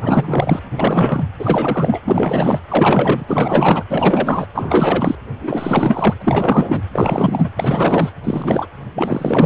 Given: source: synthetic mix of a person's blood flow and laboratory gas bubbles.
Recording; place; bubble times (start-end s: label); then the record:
Doppler ultrasound of blood flow; precordium
0.01-0.61 s: bubbles
0.76-1.23 s: bubbles
1.39-2.01 s: bubbles
2.04-2.60 s: bubbles
2.68-3.84 s: bubbles
3.89-4.46 s: bubbles
4.54-5.15 s: bubbles
5.40-6.14 s: bubbles
6.21-6.83 s: bubbles
6.92-7.51 s: bubbles
7.57-8.09 s: bubbles
8.23-8.66 s: bubbles
8.95-9.46 s: bubbles
From the record:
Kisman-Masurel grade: 444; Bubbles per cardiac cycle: continuous sound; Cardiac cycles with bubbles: 100%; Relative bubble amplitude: maximal (0.775 to 0.999); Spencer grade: 4 (maximum detectable bubble signal sounding continuously throughout systole and diastole of every cardiac period, and overriding the amplitude of the normal cardiac signals); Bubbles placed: anywhere in the cardiac cycle